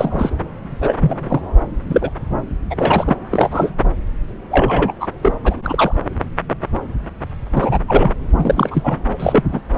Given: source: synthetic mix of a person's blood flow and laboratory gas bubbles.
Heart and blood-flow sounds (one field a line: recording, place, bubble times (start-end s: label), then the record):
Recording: Doppler ultrasound of blood flow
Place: subclavian vein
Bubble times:
0.00-0.30 s: bubbles
0.81-0.94 s: bubbles
1.00-1.41 s: bubbles
1.89-2.09 s: bubbles
2.70-3.16 s: bubbles
3.31-3.71 s: bubbles
4.51-4.93 s: bubbles
5.00-5.07 s: bubbles
5.23-5.33 s: bubbles
5.44-5.55 s: bubbles
5.62-6.02 s: bubbles
7.55-7.79 s: bubbles
7.88-8.13 s: bubbles
8.38-8.96 s: bubbles
9.20-9.43 s: bubbles
9.51-9.61 s: bubbles
From the record:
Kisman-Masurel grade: 233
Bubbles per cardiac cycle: several, 3 to 8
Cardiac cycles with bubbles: 50 to 99%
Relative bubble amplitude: loud (0.450 to 0.775)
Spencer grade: 3 (all of the cardiac periods contain showers or single bubble signals, but not dominating or overriding the cardiac motion signals)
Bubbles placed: anywhere in the cardiac cycle